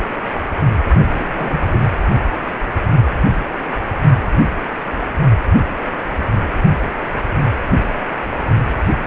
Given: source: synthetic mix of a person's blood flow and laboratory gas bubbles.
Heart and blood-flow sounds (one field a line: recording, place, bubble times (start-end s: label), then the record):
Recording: Doppler ultrasound of blood flow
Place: precordium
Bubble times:
0.89-1.99 s: bubbles
From the record:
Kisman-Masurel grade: 211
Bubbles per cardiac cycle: several, 3 to 8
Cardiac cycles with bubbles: 1 to 10%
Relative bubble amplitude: barely perceptible (0.100 to 0.250)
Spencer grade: 1 (occasional bubble signal discernible with the cardiac motion signal, with majority of cardiac periods free of bubbles)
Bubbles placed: anywhere in the cardiac cycle